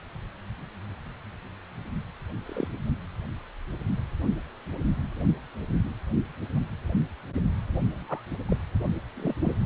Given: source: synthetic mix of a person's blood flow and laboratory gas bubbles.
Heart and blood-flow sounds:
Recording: Doppler ultrasound of blood flow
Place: precordium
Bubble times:
2.46-2.67 s: bubbles
7.91-8.21 s: bubbles
8.48-8.56 s: bubbles
9.16-9.33 s: bubbles
9.41-9.55 s: bubbles
From the record:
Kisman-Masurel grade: 121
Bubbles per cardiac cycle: 1 to 2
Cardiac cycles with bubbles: 10 to 50%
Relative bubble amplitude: barely perceptible (0.100 to 0.250)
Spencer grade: 2 (many but less than half of the cardiac periods contain bubble signals, singularly or in groups)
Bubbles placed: only in the low amplitude regions of the cardiac cycle

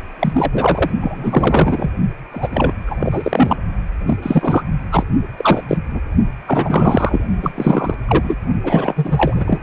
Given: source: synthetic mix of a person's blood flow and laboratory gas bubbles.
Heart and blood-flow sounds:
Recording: Doppler ultrasound of blood flow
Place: precordium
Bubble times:
0.19-0.91 s: bubbles
1.01-1.90 s: bubbles
2.31-2.73 s: bubbles
2.86-3.56 s: bubbles
4.06-4.17 s: bubbles
4.22-4.63 s: bubbles
4.92-5.04 s: bubbles
5.36-5.62 s: bubbles
5.68-5.77 s: bubbles
5.91-6.00 s: bubbles
6.46-7.24 s: bubbles
7.42-7.94 s: bubbles
8.08-8.36 s: bubbles
8.64-9.61 s: bubbles
From the record:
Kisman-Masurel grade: 343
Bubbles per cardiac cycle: rolling drumbeat, 9 or more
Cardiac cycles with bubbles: 100%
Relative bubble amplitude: loud (0.450 to 0.775)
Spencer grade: 3 (all of the cardiac periods contain showers or single bubble signals, but not dominating or overriding the cardiac motion signals)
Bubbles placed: only in the low amplitude regions of the cardiac cycle

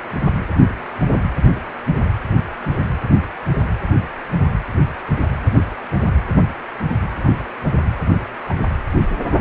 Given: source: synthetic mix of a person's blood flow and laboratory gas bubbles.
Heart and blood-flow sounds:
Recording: Doppler ultrasound of blood flow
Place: precordium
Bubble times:
7.23-7.43 s: bubbles
8.49-8.54 s: bubbles
From the record:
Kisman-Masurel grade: 121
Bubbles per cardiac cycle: 1 to 2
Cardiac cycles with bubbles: 10 to 50%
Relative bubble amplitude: barely perceptible (0.100 to 0.250)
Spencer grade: 2 (many but less than half of the cardiac periods contain bubble signals, singularly or in groups)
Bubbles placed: anywhere in the cardiac cycle

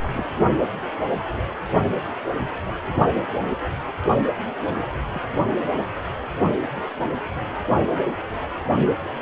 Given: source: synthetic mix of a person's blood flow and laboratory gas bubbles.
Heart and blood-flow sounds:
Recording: Doppler ultrasound of blood flow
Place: precordium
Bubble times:
0.00-0.31 s: bubbles
4.61-4.74 s: bubbles
5.12-5.22 s: bubbles
From the record:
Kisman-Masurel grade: 121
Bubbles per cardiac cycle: 1 to 2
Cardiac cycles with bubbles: 10 to 50%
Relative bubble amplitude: barely perceptible (0.100 to 0.250)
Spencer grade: 2 (many but less than half of the cardiac periods contain bubble signals, singularly or in groups)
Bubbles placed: only in the low amplitude regions of the cardiac cycle

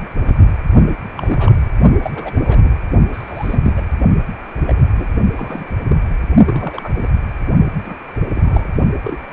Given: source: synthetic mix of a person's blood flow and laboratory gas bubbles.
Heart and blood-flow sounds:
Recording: Doppler ultrasound of blood flow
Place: precordium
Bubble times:
0.01-0.08 s: bubbles
0.25-0.41 s: bubbles
1.15-1.53 s: bubbles
2.02-2.11 s: bubbles
2.15-2.75 s: bubbles
3.12-3.59 s: bubbles
3.63-3.85 s: bubbles
4.67-5.10 s: bubbles
5.37-5.73 s: bubbles
5.88-5.96 s: bubbles
6.46-7.08 s: bubbles
7.85-7.95 s: bubbles
8.32-8.70 s: bubbles
9.04-9.18 s: bubbles
From the record:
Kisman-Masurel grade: 242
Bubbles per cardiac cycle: several, 3 to 8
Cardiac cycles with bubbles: 100%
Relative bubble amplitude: moderate (0.250 to 0.450)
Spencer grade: 3 (all of the cardiac periods contain showers or single bubble signals, but not dominating or overriding the cardiac motion signals)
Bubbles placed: only in the low amplitude regions of the cardiac cycle

